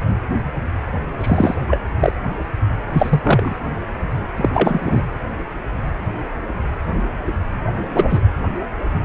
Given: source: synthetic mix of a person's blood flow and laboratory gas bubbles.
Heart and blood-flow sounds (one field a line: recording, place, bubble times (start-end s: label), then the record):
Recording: Doppler ultrasound of blood flow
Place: precordium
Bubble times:
1.21-1.55 s: bubbles
1.67-1.80 s: bubbles
1.99-2.12 s: bubbles
2.92-3.21 s: bubbles
3.23-3.55 s: bubbles
4.36-4.49 s: bubbles
4.54-5.02 s: bubbles
7.93-8.21 s: bubbles
From the record:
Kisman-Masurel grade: 223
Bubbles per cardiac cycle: several, 3 to 8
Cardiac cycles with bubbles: 10 to 50%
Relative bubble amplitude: loud (0.450 to 0.775)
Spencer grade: 2 (many but less than half of the cardiac periods contain bubble signals, singularly or in groups)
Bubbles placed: anywhere in the cardiac cycle